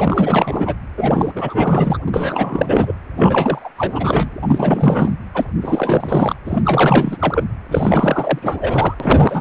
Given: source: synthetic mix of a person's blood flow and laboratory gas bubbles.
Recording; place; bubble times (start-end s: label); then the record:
Doppler ultrasound of blood flow; precordium
0.00-0.76 s: bubbles
0.97-1.31 s: bubbles
1.35-1.98 s: bubbles
2.05-2.94 s: bubbles
3.17-3.69 s: bubbles
3.76-4.31 s: bubbles
4.42-5.18 s: bubbles
5.34-5.45 s: bubbles
5.61-6.36 s: bubbles
6.45-7.44 s: bubbles
7.71-8.39 s: bubbles
8.41-8.94 s: bubbles
9.00-9.41 s: bubbles
From the record:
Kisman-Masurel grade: 444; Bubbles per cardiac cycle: continuous sound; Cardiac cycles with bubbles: 100%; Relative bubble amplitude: maximal (0.775 to 0.999); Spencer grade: 4 (maximum detectable bubble signal sounding continuously throughout systole and diastole of every cardiac period, and overriding the amplitude of the normal cardiac signals); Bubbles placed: anywhere in the cardiac cycle